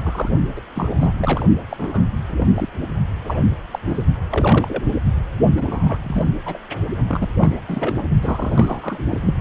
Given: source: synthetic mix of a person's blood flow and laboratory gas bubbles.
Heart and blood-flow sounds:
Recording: Doppler ultrasound of blood flow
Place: precordium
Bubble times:
0.00-0.29 s: bubbles
0.56-0.61 s: bubbles
0.74-1.13 s: bubbles
1.17-1.46 s: bubbles
1.69-2.07 s: bubbles
2.29-2.47 s: bubbles
2.54-2.69 s: bubbles
3.24-3.46 s: bubbles
3.71-3.79 s: bubbles
3.85-4.05 s: bubbles
4.30-4.82 s: bubbles
5.56-5.97 s: bubbles
6.03-6.27 s: bubbles
6.46-6.58 s: bubbles
7.08-7.27 s: bubbles
7.38-8.11 s: bubbles
8.21-9.03 s: bubbles
9.08-9.33 s: bubbles
From the record:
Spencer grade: 3 (all of the cardiac periods contain showers or single bubble signals, but not dominating or overriding the cardiac motion signals)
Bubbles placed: only in the low amplitude regions of the cardiac cycle

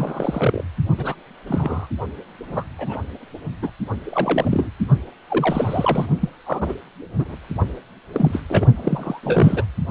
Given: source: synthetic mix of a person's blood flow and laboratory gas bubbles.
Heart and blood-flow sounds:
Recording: Doppler ultrasound of blood flow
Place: precordium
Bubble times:
0.00-0.64 s: bubbles
0.97-1.15 s: bubbles
1.47-1.88 s: bubbles
2.47-2.65 s: bubbles
2.78-2.99 s: bubbles
3.62-3.71 s: bubbles
4.04-4.70 s: bubbles
5.29-6.06 s: bubbles
6.21-6.29 s: bubbles
6.46-6.73 s: bubbles
7.18-7.36 s: bubbles
8.13-8.42 s: bubbles
8.48-8.67 s: bubbles
8.76-9.21 s: bubbles
9.23-9.64 s: bubbles
9.88-9.91 s: bubbles
From the record:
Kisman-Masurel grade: 242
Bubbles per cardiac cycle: several, 3 to 8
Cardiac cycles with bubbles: 100%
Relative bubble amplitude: moderate (0.250 to 0.450)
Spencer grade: 3 (all of the cardiac periods contain showers or single bubble signals, but not dominating or overriding the cardiac motion signals)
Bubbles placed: only in the low amplitude regions of the cardiac cycle

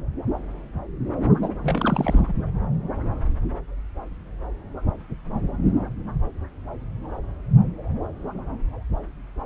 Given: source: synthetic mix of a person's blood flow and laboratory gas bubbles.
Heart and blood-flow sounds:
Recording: Doppler ultrasound of blood flow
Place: subclavian vein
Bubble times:
1.43-1.49 s: bubbles
1.62-2.33 s: bubbles
From the record:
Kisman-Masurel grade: 212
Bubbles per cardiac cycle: several, 3 to 8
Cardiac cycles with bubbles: 1 to 10%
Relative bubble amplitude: moderate (0.250 to 0.450)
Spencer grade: 1 (occasional bubble signal discernible with the cardiac motion signal, with majority of cardiac periods free of bubbles)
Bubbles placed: anywhere in the cardiac cycle

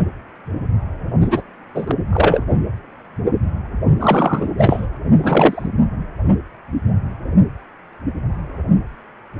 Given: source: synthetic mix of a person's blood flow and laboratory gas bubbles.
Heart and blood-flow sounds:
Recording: Doppler ultrasound of blood flow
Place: precordium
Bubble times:
1.21-1.42 s: bubbles
1.75-1.92 s: bubbles
2.12-2.43 s: bubbles
4.00-4.50 s: bubbles
4.58-4.87 s: bubbles
5.15-5.68 s: bubbles
From the record:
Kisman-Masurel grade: 223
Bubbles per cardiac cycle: several, 3 to 8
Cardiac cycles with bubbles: 10 to 50%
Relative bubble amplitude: loud (0.450 to 0.775)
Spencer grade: 2 (many but less than half of the cardiac periods contain bubble signals, singularly or in groups)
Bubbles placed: anywhere in the cardiac cycle

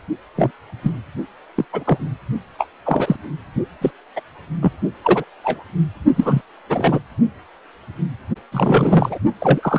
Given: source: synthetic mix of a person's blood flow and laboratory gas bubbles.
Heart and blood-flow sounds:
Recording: Doppler ultrasound of blood flow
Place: precordium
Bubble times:
0.35-0.51 s: bubbles
0.83-0.92 s: bubbles
1.55-1.65 s: bubbles
1.73-2.08 s: bubbles
2.58-2.67 s: bubbles
2.85-3.16 s: bubbles
3.81-3.91 s: bubbles
4.16-4.20 s: bubbles
4.62-4.72 s: bubbles
5.04-5.25 s: bubbles
5.43-5.64 s: bubbles
6.16-6.42 s: bubbles
6.70-6.99 s: bubbles
8.52-9.19 s: bubbles
9.40-9.79 s: bubbles
From the record:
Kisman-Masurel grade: 243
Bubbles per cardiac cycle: several, 3 to 8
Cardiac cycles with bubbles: 100%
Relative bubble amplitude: loud (0.450 to 0.775)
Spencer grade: 3 (all of the cardiac periods contain showers or single bubble signals, but not dominating or overriding the cardiac motion signals)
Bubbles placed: only in the low amplitude regions of the cardiac cycle

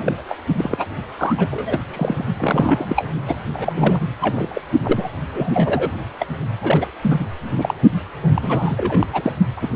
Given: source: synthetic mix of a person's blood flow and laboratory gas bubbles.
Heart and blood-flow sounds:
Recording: Doppler ultrasound of blood flow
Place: precordium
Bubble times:
0.00-0.22 s: bubbles
0.28-0.37 s: bubbles
0.56-0.86 s: bubbles
1.19-1.34 s: bubbles
1.37-1.48 s: bubbles
1.51-1.80 s: bubbles
1.90-2.25 s: bubbles
2.37-3.10 s: bubbles
3.27-3.36 s: bubbles
3.52-4.00 s: bubbles
4.21-4.61 s: bubbles
4.82-5.14 s: bubbles
5.33-5.92 s: bubbles
6.19-6.26 s: bubbles
6.62-6.90 s: bubbles
7.02-7.26 s: bubbles
7.52-7.74 s: bubbles
8.34-9.06 s: bubbles
9.13-9.32 s: bubbles
9.56-9.69 s: bubbles
From the record:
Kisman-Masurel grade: 342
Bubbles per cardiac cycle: rolling drumbeat, 9 or more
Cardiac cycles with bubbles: 100%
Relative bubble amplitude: moderate (0.250 to 0.450)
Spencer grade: 3 (all of the cardiac periods contain showers or single bubble signals, but not dominating or overriding the cardiac motion signals)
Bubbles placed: only in the low amplitude regions of the cardiac cycle

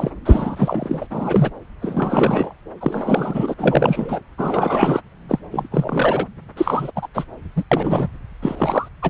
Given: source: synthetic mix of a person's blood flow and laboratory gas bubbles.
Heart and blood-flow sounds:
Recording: Doppler ultrasound of blood flow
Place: subclavian vein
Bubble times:
0.00-0.10 s: bubbles
0.25-1.07 s: bubbles
1.10-1.51 s: bubbles
1.82-2.53 s: bubbles
2.80-3.54 s: bubbles
3.58-4.20 s: bubbles
4.38-5.01 s: bubbles
5.29-5.39 s: bubbles
5.52-5.67 s: bubbles
5.71-6.27 s: bubbles
6.57-6.91 s: bubbles
6.96-7.08 s: bubbles
7.14-7.24 s: bubbles
7.56-7.63 s: bubbles
7.71-8.08 s: bubbles
8.42-8.88 s: bubbles
9.02-9.10 s: bubbles
From the record:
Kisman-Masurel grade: 343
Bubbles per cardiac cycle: rolling drumbeat, 9 or more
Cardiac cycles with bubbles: 100%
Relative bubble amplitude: loud (0.450 to 0.775)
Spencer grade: 3 (all of the cardiac periods contain showers or single bubble signals, but not dominating or overriding the cardiac motion signals)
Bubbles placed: anywhere in the cardiac cycle

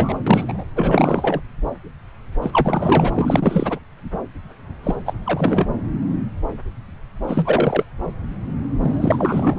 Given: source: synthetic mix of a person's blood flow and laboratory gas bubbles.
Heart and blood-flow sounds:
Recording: Doppler ultrasound of blood flow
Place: subclavian vein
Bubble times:
0.00-0.18 s: bubbles
0.27-0.66 s: bubbles
0.74-1.40 s: bubbles
2.42-3.79 s: bubbles
4.83-4.96 s: bubbles
5.05-5.13 s: bubbles
5.25-5.67 s: bubbles
7.27-7.85 s: bubbles
8.80-9.58 s: bubbles
From the record:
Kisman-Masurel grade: 333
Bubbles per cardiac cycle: rolling drumbeat, 9 or more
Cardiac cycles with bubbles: 50 to 99%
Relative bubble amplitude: loud (0.450 to 0.775)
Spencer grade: 3 (all of the cardiac periods contain showers or single bubble signals, but not dominating or overriding the cardiac motion signals)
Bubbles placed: anywhere in the cardiac cycle

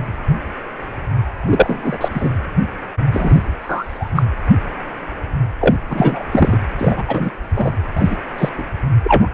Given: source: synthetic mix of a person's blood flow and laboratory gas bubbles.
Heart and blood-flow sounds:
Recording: Doppler ultrasound of blood flow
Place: precordium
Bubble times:
1.46-1.98 s: bubbles
2.00-2.08 s: bubbles
2.13-2.29 s: bubbles
3.11-3.44 s: bubbles
3.60-4.10 s: bubbles
4.15-4.23 s: bubbles
5.61-5.75 s: bubbles
5.89-6.23 s: bubbles
6.32-6.58 s: bubbles
6.79-7.04 s: bubbles
7.08-7.32 s: bubbles
7.56-7.71 s: bubbles
7.96-8.15 s: bubbles
8.38-8.49 s: bubbles
8.58-8.63 s: bubbles
9.04-9.28 s: bubbles
From the record:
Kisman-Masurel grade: 233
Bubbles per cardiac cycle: several, 3 to 8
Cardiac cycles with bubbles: 50 to 99%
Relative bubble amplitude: loud (0.450 to 0.775)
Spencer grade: 3 (all of the cardiac periods contain showers or single bubble signals, but not dominating or overriding the cardiac motion signals)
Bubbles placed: anywhere in the cardiac cycle

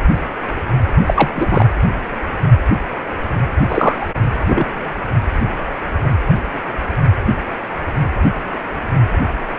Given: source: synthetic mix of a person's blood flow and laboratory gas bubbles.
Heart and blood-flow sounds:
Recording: Doppler ultrasound of blood flow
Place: precordium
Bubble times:
1.06-1.28 s: bubbles
1.35-1.66 s: bubbles
3.67-4.10 s: bubbles
4.47-4.65 s: bubbles
From the record:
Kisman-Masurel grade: 223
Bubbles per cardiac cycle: several, 3 to 8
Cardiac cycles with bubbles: 10 to 50%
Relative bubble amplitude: loud (0.450 to 0.775)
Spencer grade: 2 (many but less than half of the cardiac periods contain bubble signals, singularly or in groups)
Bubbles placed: anywhere in the cardiac cycle

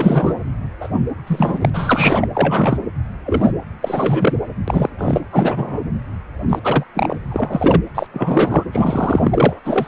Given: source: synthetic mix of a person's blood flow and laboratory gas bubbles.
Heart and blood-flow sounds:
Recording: Doppler ultrasound of blood flow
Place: precordium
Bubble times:
0.00-0.37 s: bubbles
0.80-0.89 s: bubbles
1.26-1.70 s: bubbles
1.73-2.27 s: bubbles
2.34-2.77 s: bubbles
3.25-3.52 s: bubbles
3.81-4.37 s: bubbles
4.67-4.89 s: bubbles
4.97-5.21 s: bubbles
5.32-5.82 s: bubbles
6.49-6.59 s: bubbles
6.62-6.84 s: bubbles
6.95-7.15 s: bubbles
7.31-7.80 s: bubbles
7.95-8.07 s: bubbles
8.14-8.64 s: bubbles
8.72-9.60 s: bubbles
9.65-9.88 s: bubbles
From the record:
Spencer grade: 3 (all of the cardiac periods contain showers or single bubble signals, but not dominating or overriding the cardiac motion signals)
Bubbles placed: anywhere in the cardiac cycle

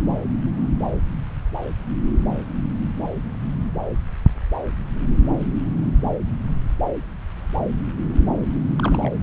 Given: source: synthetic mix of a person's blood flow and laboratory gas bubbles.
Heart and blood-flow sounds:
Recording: Doppler ultrasound of blood flow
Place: subclavian vein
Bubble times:
8.78-9.12 s: bubbles
From the record:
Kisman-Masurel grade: 111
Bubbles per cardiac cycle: 1 to 2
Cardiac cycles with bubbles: 1 to 10%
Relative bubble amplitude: barely perceptible (0.100 to 0.250)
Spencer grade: 1 (occasional bubble signal discernible with the cardiac motion signal, with majority of cardiac periods free of bubbles)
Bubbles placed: anywhere in the cardiac cycle

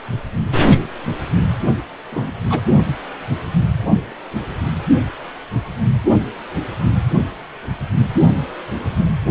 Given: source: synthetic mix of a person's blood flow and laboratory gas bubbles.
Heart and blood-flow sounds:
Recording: Doppler ultrasound of blood flow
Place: precordium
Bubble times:
2.11-2.32 s: bubbles
2.50-2.61 s: bubbles
From the record:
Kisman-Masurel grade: 123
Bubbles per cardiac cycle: 1 to 2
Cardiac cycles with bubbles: 10 to 50%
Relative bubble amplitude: loud (0.450 to 0.775)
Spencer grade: 2 (many but less than half of the cardiac periods contain bubble signals, singularly or in groups)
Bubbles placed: only in the low amplitude regions of the cardiac cycle

